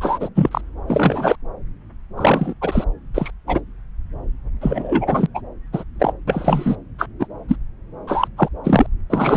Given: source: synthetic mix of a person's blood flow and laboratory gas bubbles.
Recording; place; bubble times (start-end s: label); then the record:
Doppler ultrasound of blood flow; subclavian vein
0.01-0.29 s: bubbles
0.35-0.61 s: bubbles
0.87-1.36 s: bubbles
2.17-2.54 s: bubbles
2.61-2.84 s: bubbles
3.14-3.30 s: bubbles
3.47-3.61 s: bubbles
4.61-5.27 s: bubbles
5.34-5.41 s: bubbles
5.73-5.83 s: bubbles
5.99-6.12 s: bubbles
6.27-6.76 s: bubbles
6.99-7.07 s: bubbles
7.19-7.27 s: bubbles
7.48-7.56 s: bubbles
8.07-8.27 s: bubbles
8.37-8.49 s: bubbles
8.64-8.87 s: bubbles
9.10-9.37 s: bubbles
From the record:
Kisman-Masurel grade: 243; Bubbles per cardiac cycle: several, 3 to 8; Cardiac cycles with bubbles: 100%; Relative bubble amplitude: loud (0.450 to 0.775); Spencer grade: 3 (all of the cardiac periods contain showers or single bubble signals, but not dominating or overriding the cardiac motion signals); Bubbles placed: anywhere in the cardiac cycle